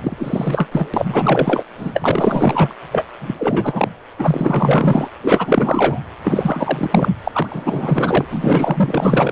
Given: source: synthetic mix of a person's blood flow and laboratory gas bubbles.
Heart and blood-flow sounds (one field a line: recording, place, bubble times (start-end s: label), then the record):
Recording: Doppler ultrasound of blood flow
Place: precordium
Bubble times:
0.00-0.68 s: bubbles
0.71-0.89 s: bubbles
0.93-1.64 s: bubbles
1.77-2.75 s: bubbles
2.91-3.06 s: bubbles
3.21-3.35 s: bubbles
3.39-3.90 s: bubbles
4.19-5.08 s: bubbles
5.23-6.00 s: bubbles
6.23-7.09 s: bubbles
7.24-8.25 s: bubbles
8.30-9.32 s: bubbles
From the record:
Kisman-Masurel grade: 444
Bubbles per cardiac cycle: continuous sound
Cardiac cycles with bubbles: 100%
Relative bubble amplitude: maximal (0.775 to 0.999)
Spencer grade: 4 (maximum detectable bubble signal sounding continuously throughout systole and diastole of every cardiac period, and overriding the amplitude of the normal cardiac signals)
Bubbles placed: anywhere in the cardiac cycle